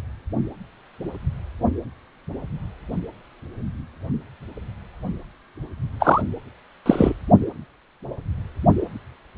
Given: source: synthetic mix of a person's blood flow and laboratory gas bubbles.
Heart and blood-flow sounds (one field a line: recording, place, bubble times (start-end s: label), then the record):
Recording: Doppler ultrasound of blood flow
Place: precordium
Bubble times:
6.00-6.21 s: bubbles
6.86-7.13 s: bubbles
From the record:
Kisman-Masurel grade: 213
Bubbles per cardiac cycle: several, 3 to 8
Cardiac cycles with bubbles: 1 to 10%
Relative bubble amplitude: loud (0.450 to 0.775)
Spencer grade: 1 (occasional bubble signal discernible with the cardiac motion signal, with majority of cardiac periods free of bubbles)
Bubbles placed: only in the low amplitude regions of the cardiac cycle